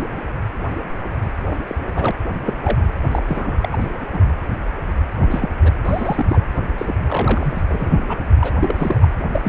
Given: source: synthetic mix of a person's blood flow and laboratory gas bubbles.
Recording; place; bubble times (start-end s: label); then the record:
Doppler ultrasound of blood flow; precordium
1.48-1.56 s: bubbles
1.67-1.75 s: bubbles
1.96-2.11 s: bubbles
2.46-2.88 s: bubbles
3.11-3.23 s: bubbles
3.27-3.69 s: bubbles
3.72-3.76 s: bubbles
3.80-3.89 s: bubbles
3.99-4.06 s: bubbles
4.12-4.25 s: bubbles
5.23-5.49 s: bubbles
5.61-5.71 s: bubbles
5.85-6.40 s: bubbles
6.77-6.96 s: bubbles
7.06-7.61 s: bubbles
7.70-7.98 s: bubbles
8.08-8.17 s: bubbles
8.41-8.50 s: bubbles
8.61-8.99 s: bubbles
9.01-9.07 s: bubbles
9.32-9.49 s: bubbles
From the record:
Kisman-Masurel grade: 232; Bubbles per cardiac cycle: several, 3 to 8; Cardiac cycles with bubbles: 50 to 99%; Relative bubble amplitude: moderate (0.250 to 0.450); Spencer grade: 3 (all of the cardiac periods contain showers or single bubble signals, but not dominating or overriding the cardiac motion signals); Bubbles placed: anywhere in the cardiac cycle